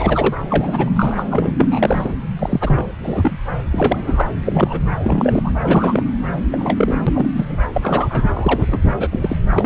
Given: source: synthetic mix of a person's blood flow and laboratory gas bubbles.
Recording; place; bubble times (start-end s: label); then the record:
Doppler ultrasound of blood flow; subclavian vein
0.00-0.35 s: bubbles
0.41-0.90 s: bubbles
0.95-1.23 s: bubbles
1.31-1.52 s: bubbles
1.58-2.12 s: bubbles
2.39-2.90 s: bubbles
3.03-3.39 s: bubbles
3.72-4.31 s: bubbles
4.46-4.80 s: bubbles
5.04-5.50 s: bubbles
5.62-6.04 s: bubbles
6.50-6.98 s: bubbles
7.06-7.29 s: bubbles
7.35-7.58 s: bubbles
7.73-8.26 s: bubbles
8.34-8.78 s: bubbles
8.98-9.37 s: bubbles
9.51-9.66 s: bubbles
From the record:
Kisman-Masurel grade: 242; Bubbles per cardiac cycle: several, 3 to 8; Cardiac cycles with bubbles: 100%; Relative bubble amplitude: moderate (0.250 to 0.450); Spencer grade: 3 (all of the cardiac periods contain showers or single bubble signals, but not dominating or overriding the cardiac motion signals); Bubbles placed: anywhere in the cardiac cycle